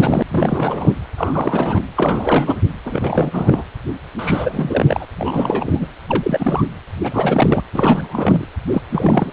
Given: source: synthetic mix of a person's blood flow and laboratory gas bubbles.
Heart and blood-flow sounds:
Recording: Doppler ultrasound of blood flow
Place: precordium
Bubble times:
0.00-0.23 s: bubbles
0.30-0.95 s: bubbles
1.18-1.81 s: bubbles
1.96-2.61 s: bubbles
2.85-3.64 s: bubbles
4.18-5.05 s: bubbles
5.16-5.87 s: bubbles
6.07-6.64 s: bubbles
7.03-7.62 s: bubbles
7.74-8.46 s: bubbles
8.72-8.82 s: bubbles
8.92-9.32 s: bubbles
From the record:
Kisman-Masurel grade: 342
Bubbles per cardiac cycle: rolling drumbeat, 9 or more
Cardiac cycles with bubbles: 100%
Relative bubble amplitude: moderate (0.250 to 0.450)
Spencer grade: 3 (all of the cardiac periods contain showers or single bubble signals, but not dominating or overriding the cardiac motion signals)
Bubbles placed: anywhere in the cardiac cycle

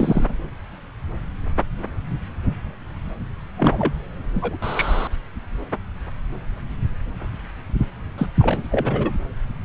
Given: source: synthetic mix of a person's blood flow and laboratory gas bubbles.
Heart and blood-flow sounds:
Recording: Doppler ultrasound of blood flow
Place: subclavian vein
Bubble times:
0.00-0.27 s: bubbles
3.58-3.94 s: bubbles
4.34-4.57 s: bubbles
4.62-5.07 s: bubbles
8.17-8.26 s: bubbles
8.39-8.62 s: bubbles
8.71-9.11 s: bubbles
From the record:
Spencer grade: 2 (many but less than half of the cardiac periods contain bubble signals, singularly or in groups)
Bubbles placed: anywhere in the cardiac cycle

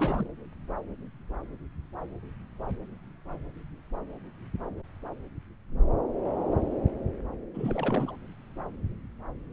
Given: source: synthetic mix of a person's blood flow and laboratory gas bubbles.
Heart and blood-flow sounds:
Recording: Doppler ultrasound of blood flow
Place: subclavian vein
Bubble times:
0.00-0.28 s: bubbles
7.54-8.16 s: bubbles
From the record:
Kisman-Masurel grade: 211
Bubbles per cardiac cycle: several, 3 to 8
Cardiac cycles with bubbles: 1 to 10%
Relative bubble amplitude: barely perceptible (0.100 to 0.250)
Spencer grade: 1 (occasional bubble signal discernible with the cardiac motion signal, with majority of cardiac periods free of bubbles)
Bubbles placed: anywhere in the cardiac cycle

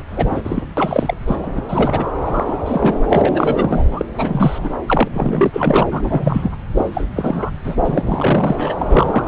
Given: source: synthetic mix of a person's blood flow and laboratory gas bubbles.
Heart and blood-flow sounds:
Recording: Doppler ultrasound of blood flow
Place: subclavian vein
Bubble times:
0.07-0.63 s: bubbles
0.77-1.14 s: bubbles
1.27-1.36 s: bubbles
1.42-1.61 s: bubbles
1.69-2.06 s: bubbles
2.21-2.99 s: bubbles
3.09-3.83 s: bubbles
3.90-4.05 s: bubbles
4.14-4.69 s: bubbles
4.87-5.08 s: bubbles
5.13-5.83 s: bubbles
5.91-6.50 s: bubbles
6.77-6.85 s: bubbles
6.93-7.04 s: bubbles
7.16-7.50 s: bubbles
7.64-7.76 s: bubbles
7.83-8.75 s: bubbles
8.77-9.28 s: bubbles
From the record:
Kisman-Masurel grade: 343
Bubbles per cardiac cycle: rolling drumbeat, 9 or more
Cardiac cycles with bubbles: 100%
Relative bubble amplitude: loud (0.450 to 0.775)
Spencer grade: 3 (all of the cardiac periods contain showers or single bubble signals, but not dominating or overriding the cardiac motion signals)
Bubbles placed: anywhere in the cardiac cycle

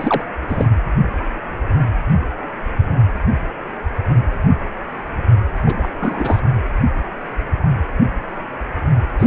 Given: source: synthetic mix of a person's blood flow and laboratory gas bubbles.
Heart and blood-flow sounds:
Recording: Doppler ultrasound of blood flow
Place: precordium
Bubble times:
0.00-0.24 s: bubbles
0.47-0.67 s: bubbles
5.66-5.75 s: bubbles
5.77-5.88 s: bubbles
6.00-6.40 s: bubbles
9.19-9.27 s: bubbles
From the record:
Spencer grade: 2 (many but less than half of the cardiac periods contain bubble signals, singularly or in groups)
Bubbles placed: anywhere in the cardiac cycle

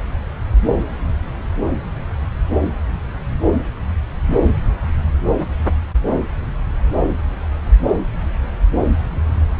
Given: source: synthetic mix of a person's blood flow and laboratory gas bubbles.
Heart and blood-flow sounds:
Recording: Doppler ultrasound of blood flow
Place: subclavian vein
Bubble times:
no bubbles
From the record:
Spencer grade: 0 (complete lack of bubble signals)

